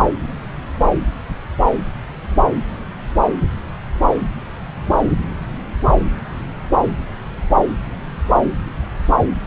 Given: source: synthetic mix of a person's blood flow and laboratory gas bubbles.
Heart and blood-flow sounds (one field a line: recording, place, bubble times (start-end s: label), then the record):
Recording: Doppler ultrasound of blood flow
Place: subclavian vein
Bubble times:
4.99-5.15 s: bubbles
From the record:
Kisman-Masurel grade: 112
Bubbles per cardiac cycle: 1 to 2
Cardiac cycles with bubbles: 1 to 10%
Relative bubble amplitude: moderate (0.250 to 0.450)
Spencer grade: 1 (occasional bubble signal discernible with the cardiac motion signal, with majority of cardiac periods free of bubbles)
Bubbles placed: anywhere in the cardiac cycle